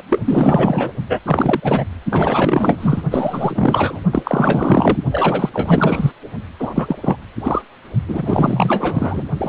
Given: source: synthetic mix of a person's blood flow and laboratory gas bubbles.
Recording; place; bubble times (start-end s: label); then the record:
Doppler ultrasound of blood flow; precordium
0.00-0.02 s: bubbles
0.10-0.21 s: bubbles
0.26-0.92 s: bubbles
1.09-1.20 s: bubbles
1.26-1.84 s: bubbles
2.10-3.01 s: bubbles
3.10-4.00 s: bubbles
4.12-4.98 s: bubbles
5.12-5.50 s: bubbles
5.54-6.12 s: bubbles
6.60-6.71 s: bubbles
6.75-6.96 s: bubbles
7.02-7.17 s: bubbles
7.43-7.62 s: bubbles
8.08-9.23 s: bubbles
9.37-9.49 s: bubbles
From the record:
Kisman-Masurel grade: 444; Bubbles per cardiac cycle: continuous sound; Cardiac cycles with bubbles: 100%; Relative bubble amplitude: maximal (0.775 to 0.999); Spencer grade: 4 (maximum detectable bubble signal sounding continuously throughout systole and diastole of every cardiac period, and overriding the amplitude of the normal cardiac signals); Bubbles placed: only in the low amplitude regions of the cardiac cycle